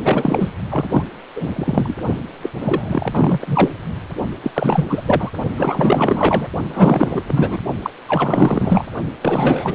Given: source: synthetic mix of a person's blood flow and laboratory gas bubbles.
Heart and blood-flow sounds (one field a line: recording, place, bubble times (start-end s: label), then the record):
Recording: Doppler ultrasound of blood flow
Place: precordium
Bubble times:
0.04-0.52 s: bubbles
0.69-1.04 s: bubbles
1.35-1.47 s: bubbles
1.54-1.98 s: bubbles
2.42-2.50 s: bubbles
2.60-3.73 s: bubbles
4.42-4.50 s: bubbles
4.54-4.86 s: bubbles
4.89-5.03 s: bubbles
5.05-5.30 s: bubbles
5.57-6.47 s: bubbles
6.69-7.22 s: bubbles
7.28-7.58 s: bubbles
7.82-7.90 s: bubbles
8.08-8.88 s: bubbles
9.21-9.75 s: bubbles
From the record:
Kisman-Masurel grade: 444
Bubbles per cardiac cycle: continuous sound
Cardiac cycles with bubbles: 100%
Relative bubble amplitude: maximal (0.775 to 0.999)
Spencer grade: 4 (maximum detectable bubble signal sounding continuously throughout systole and diastole of every cardiac period, and overriding the amplitude of the normal cardiac signals)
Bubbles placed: only in the low amplitude regions of the cardiac cycle